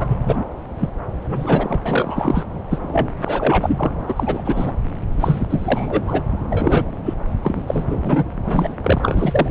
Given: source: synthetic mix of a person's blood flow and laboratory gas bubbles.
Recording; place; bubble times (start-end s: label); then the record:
Doppler ultrasound of blood flow; subclavian vein
0.00-0.44 s: bubbles
0.79-0.89 s: bubbles
1.24-1.79 s: bubbles
1.85-2.46 s: bubbles
2.71-2.79 s: bubbles
2.82-3.12 s: bubbles
3.24-3.92 s: bubbles
4.08-4.73 s: bubbles
5.20-6.22 s: bubbles
6.49-6.97 s: bubbles
7.05-7.14 s: bubbles
7.42-7.62 s: bubbles
7.67-8.24 s: bubbles
8.44-8.74 s: bubbles
8.83-9.51 s: bubbles
From the record:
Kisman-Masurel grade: 333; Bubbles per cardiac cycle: rolling drumbeat, 9 or more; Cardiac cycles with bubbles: 50 to 99%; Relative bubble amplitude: loud (0.450 to 0.775); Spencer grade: 3 (all of the cardiac periods contain showers or single bubble signals, but not dominating or overriding the cardiac motion signals); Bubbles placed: anywhere in the cardiac cycle